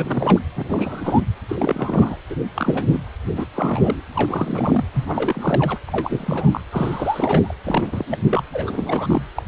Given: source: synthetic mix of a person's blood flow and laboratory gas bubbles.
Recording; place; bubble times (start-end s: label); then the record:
Doppler ultrasound of blood flow; precordium
0.00-0.39 s: bubbles
0.55-1.21 s: bubbles
1.49-2.18 s: bubbles
2.29-2.36 s: bubbles
2.56-2.98 s: bubbles
3.27-3.46 s: bubbles
3.53-4.02 s: bubbles
4.12-4.84 s: bubbles
4.93-5.78 s: bubbles
5.87-6.60 s: bubbles
6.72-7.53 s: bubbles
7.65-8.05 s: bubbles
8.10-8.18 s: bubbles
8.29-8.43 s: bubbles
8.53-9.28 s: bubbles
9.35-9.42 s: bubbles
From the record:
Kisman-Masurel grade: 342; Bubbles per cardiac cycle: rolling drumbeat, 9 or more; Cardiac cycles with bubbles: 100%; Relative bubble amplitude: moderate (0.250 to 0.450); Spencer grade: 3 (all of the cardiac periods contain showers or single bubble signals, but not dominating or overriding the cardiac motion signals); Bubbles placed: anywhere in the cardiac cycle